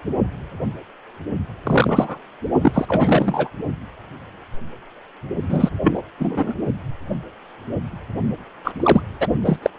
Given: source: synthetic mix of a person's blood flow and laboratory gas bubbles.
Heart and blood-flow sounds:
Doppler ultrasound of blood flow; precordium
1.64-2.18 s: bubbles
2.61-2.85 s: bubbles
2.88-3.50 s: bubbles
5.49-5.70 s: bubbles
5.83-6.03 s: bubbles
6.18-6.54 s: bubbles
8.63-8.72 s: bubbles
8.80-9.01 s: bubbles
9.20-9.27 s: bubbles
9.45-9.58 s: bubbles
9.62-9.70 s: bubbles
9.77-9.79 s: bubbles
From the record:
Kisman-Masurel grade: 233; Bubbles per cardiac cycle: several, 3 to 8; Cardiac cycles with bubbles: 50 to 99%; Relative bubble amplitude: loud (0.450 to 0.775); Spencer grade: 3 (all of the cardiac periods contain showers or single bubble signals, but not dominating or overriding the cardiac motion signals); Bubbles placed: only in the low amplitude regions of the cardiac cycle

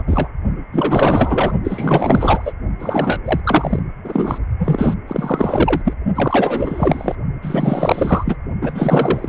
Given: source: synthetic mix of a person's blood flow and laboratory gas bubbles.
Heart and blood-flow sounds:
Doppler ultrasound of blood flow; precordium
0.00-0.03 s: bubbles
0.06-0.28 s: bubbles
0.72-1.53 s: bubbles
1.64-2.52 s: bubbles
2.79-3.21 s: bubbles
3.25-3.41 s: bubbles
3.44-3.82 s: bubbles
4.04-4.38 s: bubbles
4.59-4.94 s: bubbles
5.07-5.82 s: bubbles
5.84-5.93 s: bubbles
6.15-7.15 s: bubbles
7.42-8.37 s: bubbles
8.62-9.29 s: bubbles
From the record:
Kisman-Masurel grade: 444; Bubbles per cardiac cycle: continuous sound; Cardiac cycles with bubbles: 100%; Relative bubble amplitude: maximal (0.775 to 0.999); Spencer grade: 4 (maximum detectable bubble signal sounding continuously throughout systole and diastole of every cardiac period, and overriding the amplitude of the normal cardiac signals); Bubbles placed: only in the low amplitude regions of the cardiac cycle

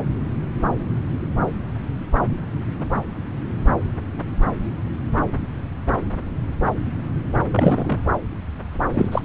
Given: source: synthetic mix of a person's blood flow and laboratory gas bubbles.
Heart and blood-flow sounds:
Doppler ultrasound of blood flow; subclavian vein
7.51-8.02 s: bubbles
8.94-9.09 s: bubbles
9.12-9.21 s: bubbles
From the record:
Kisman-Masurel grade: 222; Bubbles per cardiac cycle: several, 3 to 8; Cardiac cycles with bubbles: 10 to 50%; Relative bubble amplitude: moderate (0.250 to 0.450); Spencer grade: 2 (many but less than half of the cardiac periods contain bubble signals, singularly or in groups); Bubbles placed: anywhere in the cardiac cycle

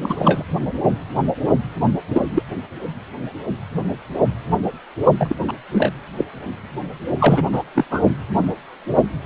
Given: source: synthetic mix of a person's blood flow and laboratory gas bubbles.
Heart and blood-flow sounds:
Doppler ultrasound of blood flow; precordium
0.00-0.46 s: bubbles
2.10-2.22 s: bubbles
2.33-2.42 s: bubbles
5.18-5.36 s: bubbles
5.48-5.53 s: bubbles
5.72-5.92 s: bubbles
6.17-6.25 s: bubbles
7.19-7.42 s: bubbles
7.53-7.63 s: bubbles
7.75-7.84 s: bubbles
7.91-8.01 s: bubbles
From the record:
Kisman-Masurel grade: 222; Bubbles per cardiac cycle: several, 3 to 8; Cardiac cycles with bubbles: 10 to 50%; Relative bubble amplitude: moderate (0.250 to 0.450); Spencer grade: 2 (many but less than half of the cardiac periods contain bubble signals, singularly or in groups); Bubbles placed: only in the low amplitude regions of the cardiac cycle

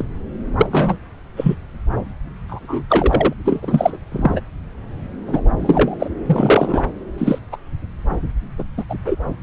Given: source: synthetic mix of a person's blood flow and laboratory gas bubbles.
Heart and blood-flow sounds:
Doppler ultrasound of blood flow; subclavian vein
0.00-0.04 s: bubbles
0.58-0.67 s: bubbles
0.71-0.97 s: bubbles
1.36-1.55 s: bubbles
2.47-3.33 s: bubbles
3.44-3.97 s: bubbles
4.11-4.41 s: bubbles
5.26-5.41 s: bubbles
5.58-5.96 s: bubbles
6.00-6.08 s: bubbles
6.25-6.83 s: bubbles
7.17-7.38 s: bubbles
7.52-7.56 s: bubbles
8.58-8.64 s: bubbles
8.78-8.84 s: bubbles
8.89-8.95 s: bubbles
9.06-9.16 s: bubbles
From the record:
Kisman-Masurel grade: 233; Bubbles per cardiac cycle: several, 3 to 8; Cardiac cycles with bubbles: 50 to 99%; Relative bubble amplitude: loud (0.450 to 0.775); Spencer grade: 3 (all of the cardiac periods contain showers or single bubble signals, but not dominating or overriding the cardiac motion signals); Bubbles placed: anywhere in the cardiac cycle

